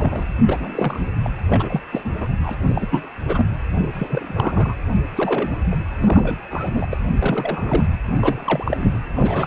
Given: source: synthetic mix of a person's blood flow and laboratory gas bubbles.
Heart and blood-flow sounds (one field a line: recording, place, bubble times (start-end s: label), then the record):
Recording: Doppler ultrasound of blood flow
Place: precordium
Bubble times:
0.00-0.26 s: bubbles
0.47-1.11 s: bubbles
1.24-1.30 s: bubbles
1.49-1.81 s: bubbles
1.92-2.01 s: bubbles
2.04-2.10 s: bubbles
2.20-2.27 s: bubbles
2.42-2.55 s: bubbles
2.68-2.88 s: bubbles
2.90-3.00 s: bubbles
3.26-3.46 s: bubbles
3.78-3.90 s: bubbles
3.93-4.75 s: bubbles
5.15-5.56 s: bubbles
5.71-5.75 s: bubbles
6.01-6.36 s: bubbles
6.50-6.87 s: bubbles
6.91-6.97 s: bubbles
7.19-7.87 s: bubbles
8.13-8.98 s: bubbles
9.14-9.47 s: bubbles
From the record:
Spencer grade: 3 (all of the cardiac periods contain showers or single bubble signals, but not dominating or overriding the cardiac motion signals)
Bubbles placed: anywhere in the cardiac cycle